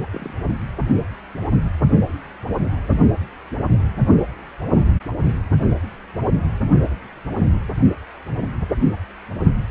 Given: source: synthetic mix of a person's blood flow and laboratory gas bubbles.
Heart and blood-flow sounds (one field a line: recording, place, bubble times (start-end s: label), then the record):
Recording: Doppler ultrasound of blood flow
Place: precordium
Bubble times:
0.13-0.33 s: bubbles
From the record:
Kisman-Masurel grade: 211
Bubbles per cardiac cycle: several, 3 to 8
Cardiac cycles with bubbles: 1 to 10%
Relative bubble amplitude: barely perceptible (0.100 to 0.250)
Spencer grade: 1 (occasional bubble signal discernible with the cardiac motion signal, with majority of cardiac periods free of bubbles)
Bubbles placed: only in the low amplitude regions of the cardiac cycle